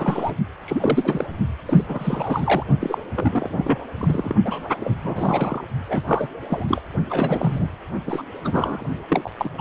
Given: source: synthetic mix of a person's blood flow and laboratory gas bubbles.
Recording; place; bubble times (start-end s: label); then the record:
Doppler ultrasound of blood flow; precordium
0.00-0.35 s: bubbles
0.66-1.26 s: bubbles
1.66-1.85 s: bubbles
1.88-2.64 s: bubbles
2.81-2.98 s: bubbles
3.15-3.49 s: bubbles
3.53-3.78 s: bubbles
3.98-4.35 s: bubbles
4.44-4.68 s: bubbles
4.80-4.97 s: bubbles
5.04-5.64 s: bubbles
5.86-6.28 s: bubbles
6.49-6.65 s: bubbles
6.68-6.81 s: bubbles
7.09-7.70 s: bubbles
8.06-8.22 s: bubbles
8.44-8.85 s: bubbles
9.11-9.30 s: bubbles
9.38-9.49 s: bubbles
9.54-9.61 s: bubbles
From the record:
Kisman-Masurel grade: 342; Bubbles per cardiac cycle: rolling drumbeat, 9 or more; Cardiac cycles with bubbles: 100%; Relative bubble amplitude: moderate (0.250 to 0.450); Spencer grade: 3 (all of the cardiac periods contain showers or single bubble signals, but not dominating or overriding the cardiac motion signals); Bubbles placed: only in the low amplitude regions of the cardiac cycle